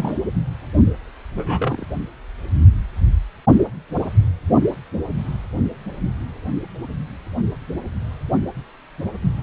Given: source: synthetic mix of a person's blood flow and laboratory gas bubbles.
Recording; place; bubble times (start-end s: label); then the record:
Doppler ultrasound of blood flow; precordium
0.00-0.18 s: bubbles
1.36-1.85 s: bubbles
From the record:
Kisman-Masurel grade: 122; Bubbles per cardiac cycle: 1 to 2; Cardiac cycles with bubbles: 10 to 50%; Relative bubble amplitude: moderate (0.250 to 0.450); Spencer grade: 2 (many but less than half of the cardiac periods contain bubble signals, singularly or in groups); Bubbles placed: only in the low amplitude regions of the cardiac cycle